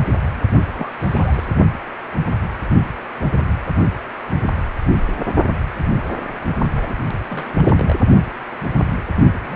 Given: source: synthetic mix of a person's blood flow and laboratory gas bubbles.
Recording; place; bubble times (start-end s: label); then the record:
Doppler ultrasound of blood flow; precordium
0.73-0.91 s: bubbles
1.00-1.46 s: bubbles
6.77-6.95 s: bubbles
7.30-7.62 s: bubbles
7.65-7.96 s: bubbles
9.44-9.56 s: bubbles
From the record:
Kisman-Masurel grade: 221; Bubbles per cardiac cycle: several, 3 to 8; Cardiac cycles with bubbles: 10 to 50%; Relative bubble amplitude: barely perceptible (0.100 to 0.250); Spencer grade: 2 (many but less than half of the cardiac periods contain bubble signals, singularly or in groups); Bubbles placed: only in the low amplitude regions of the cardiac cycle